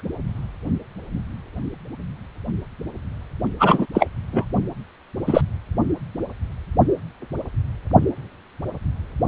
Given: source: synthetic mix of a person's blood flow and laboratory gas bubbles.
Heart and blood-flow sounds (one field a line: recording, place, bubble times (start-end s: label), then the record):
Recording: Doppler ultrasound of blood flow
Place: precordium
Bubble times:
3.59-3.86 s: bubbles
3.94-4.07 s: bubbles
4.32-4.45 s: bubbles
5.26-5.41 s: bubbles
From the record:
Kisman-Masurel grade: 223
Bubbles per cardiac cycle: several, 3 to 8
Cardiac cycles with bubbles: 10 to 50%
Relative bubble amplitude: loud (0.450 to 0.775)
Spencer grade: 2 (many but less than half of the cardiac periods contain bubble signals, singularly or in groups)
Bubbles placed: only in the low amplitude regions of the cardiac cycle